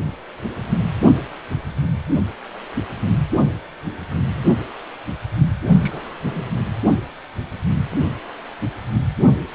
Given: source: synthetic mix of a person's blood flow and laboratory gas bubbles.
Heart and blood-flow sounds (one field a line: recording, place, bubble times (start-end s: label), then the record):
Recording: Doppler ultrasound of blood flow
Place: precordium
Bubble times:
5.69-6.14 s: bubbles
6.23-6.45 s: bubbles
From the record:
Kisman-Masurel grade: 211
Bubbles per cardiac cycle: several, 3 to 8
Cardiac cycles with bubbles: 1 to 10%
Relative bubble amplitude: barely perceptible (0.100 to 0.250)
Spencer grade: 1 (occasional bubble signal discernible with the cardiac motion signal, with majority of cardiac periods free of bubbles)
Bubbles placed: anywhere in the cardiac cycle